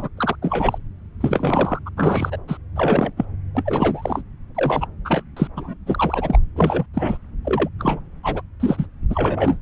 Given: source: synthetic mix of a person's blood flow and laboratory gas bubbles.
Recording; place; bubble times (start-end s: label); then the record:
Doppler ultrasound of blood flow; subclavian vein
0.00-0.09 s: bubbles
0.17-0.35 s: bubbles
0.42-0.78 s: bubbles
1.21-1.79 s: bubbles
1.86-1.89 s: bubbles
1.97-2.38 s: bubbles
2.47-2.58 s: bubbles
2.75-3.12 s: bubbles
3.17-3.25 s: bubbles
3.54-4.22 s: bubbles
4.54-4.87 s: bubbles
5.04-5.23 s: bubbles
5.37-5.47 s: bubbles
5.56-5.75 s: bubbles
5.86-6.38 s: bubbles
6.55-6.86 s: bubbles
6.93-7.17 s: bubbles
7.44-7.69 s: bubbles
7.79-8.00 s: bubbles
8.23-8.41 s: bubbles
8.60-8.86 s: bubbles
9.10-9.59 s: bubbles
From the record:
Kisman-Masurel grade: 243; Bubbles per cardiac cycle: several, 3 to 8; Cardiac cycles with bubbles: 100%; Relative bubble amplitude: loud (0.450 to 0.775); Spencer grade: 3 (all of the cardiac periods contain showers or single bubble signals, but not dominating or overriding the cardiac motion signals); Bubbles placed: anywhere in the cardiac cycle